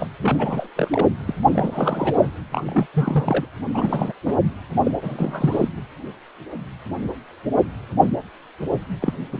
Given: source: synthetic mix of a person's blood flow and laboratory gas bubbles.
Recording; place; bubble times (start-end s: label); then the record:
Doppler ultrasound of blood flow; precordium
0.00-0.08 s: bubbles
0.22-0.70 s: bubbles
0.76-0.89 s: bubbles
0.92-1.07 s: bubbles
1.26-1.34 s: bubbles
1.51-2.29 s: bubbles
2.52-2.86 s: bubbles
2.94-3.46 s: bubbles
3.74-4.12 s: bubbles
4.25-4.36 s: bubbles
4.83-4.91 s: bubbles
5.02-5.69 s: bubbles
9.00-9.13 s: bubbles
9.30-9.40 s: bubbles
From the record:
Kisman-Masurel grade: 332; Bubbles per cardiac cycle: rolling drumbeat, 9 or more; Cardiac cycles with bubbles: 50 to 99%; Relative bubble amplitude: moderate (0.250 to 0.450); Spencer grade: 3 (all of the cardiac periods contain showers or single bubble signals, but not dominating or overriding the cardiac motion signals); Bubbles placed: anywhere in the cardiac cycle